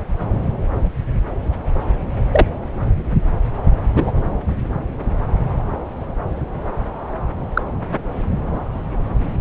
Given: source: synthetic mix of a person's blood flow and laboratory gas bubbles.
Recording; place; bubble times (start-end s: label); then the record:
Doppler ultrasound of blood flow; subclavian vein
2.32-2.47 s: bubbles
3.96-4.12 s: bubbles
7.54-7.63 s: bubbles
From the record:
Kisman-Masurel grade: 123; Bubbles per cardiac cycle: 1 to 2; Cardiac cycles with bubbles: 10 to 50%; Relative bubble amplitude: loud (0.450 to 0.775); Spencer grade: 2 (many but less than half of the cardiac periods contain bubble signals, singularly or in groups); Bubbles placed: anywhere in the cardiac cycle